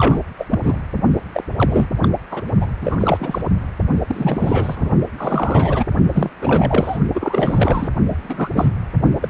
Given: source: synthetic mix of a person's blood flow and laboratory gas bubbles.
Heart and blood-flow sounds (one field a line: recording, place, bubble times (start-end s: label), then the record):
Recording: Doppler ultrasound of blood flow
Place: precordium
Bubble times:
0.00-0.19 s: bubbles
0.38-0.46 s: bubbles
0.51-0.58 s: bubbles
0.62-0.78 s: bubbles
1.34-1.44 s: bubbles
1.56-1.86 s: bubbles
2.02-2.08 s: bubbles
2.31-2.43 s: bubbles
2.60-2.67 s: bubbles
2.81-2.96 s: bubbles
3.00-3.42 s: bubbles
4.07-4.89 s: bubbles
5.18-5.85 s: bubbles
6.14-6.29 s: bubbles
6.41-6.97 s: bubbles
7.14-7.89 s: bubbles
8.09-8.16 s: bubbles
8.22-8.48 s: bubbles
8.53-8.71 s: bubbles
9.21-9.30 s: bubbles
From the record:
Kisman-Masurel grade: 342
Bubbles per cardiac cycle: rolling drumbeat, 9 or more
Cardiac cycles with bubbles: 100%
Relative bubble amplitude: moderate (0.250 to 0.450)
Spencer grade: 3 (all of the cardiac periods contain showers or single bubble signals, but not dominating or overriding the cardiac motion signals)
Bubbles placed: only in the low amplitude regions of the cardiac cycle